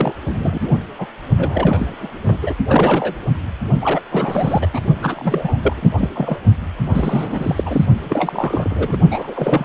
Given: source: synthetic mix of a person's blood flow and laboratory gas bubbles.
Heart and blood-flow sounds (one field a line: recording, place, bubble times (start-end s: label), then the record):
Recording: Doppler ultrasound of blood flow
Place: precordium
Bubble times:
0.00-0.12 s: bubbles
0.27-0.70 s: bubbles
0.98-1.06 s: bubbles
1.37-2.09 s: bubbles
2.23-2.38 s: bubbles
2.42-2.54 s: bubbles
2.68-3.17 s: bubbles
3.29-3.35 s: bubbles
3.81-4.02 s: bubbles
4.12-4.68 s: bubbles
4.74-4.82 s: bubbles
5.01-5.57 s: bubbles
5.62-5.73 s: bubbles
5.76-5.88 s: bubbles
5.92-6.09 s: bubbles
6.15-6.37 s: bubbles
6.84-7.86 s: bubbles
8.04-8.97 s: bubbles
9.09-9.65 s: bubbles
From the record:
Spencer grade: 3 (all of the cardiac periods contain showers or single bubble signals, but not dominating or overriding the cardiac motion signals)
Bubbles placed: only in the low amplitude regions of the cardiac cycle